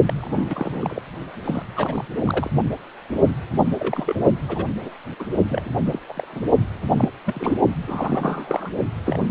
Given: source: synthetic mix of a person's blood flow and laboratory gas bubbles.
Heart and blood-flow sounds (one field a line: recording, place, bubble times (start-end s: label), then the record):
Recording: Doppler ultrasound of blood flow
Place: precordium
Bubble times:
0.07-0.14 s: bubbles
0.18-1.02 s: bubbles
1.44-1.62 s: bubbles
1.76-2.04 s: bubbles
2.16-2.22 s: bubbles
2.25-2.50 s: bubbles
3.58-3.66 s: bubbles
3.79-4.16 s: bubbles
4.48-4.66 s: bubbles
4.79-4.89 s: bubbles
5.20-5.28 s: bubbles
5.49-5.70 s: bubbles
5.77-5.81 s: bubbles
5.84-5.99 s: bubbles
6.09-6.13 s: bubbles
6.16-6.27 s: bubbles
6.32-6.40 s: bubbles
6.96-7.08 s: bubbles
7.25-7.58 s: bubbles
7.87-8.69 s: bubbles
9.04-9.25 s: bubbles
From the record:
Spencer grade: 3 (all of the cardiac periods contain showers or single bubble signals, but not dominating or overriding the cardiac motion signals)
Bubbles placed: only in the low amplitude regions of the cardiac cycle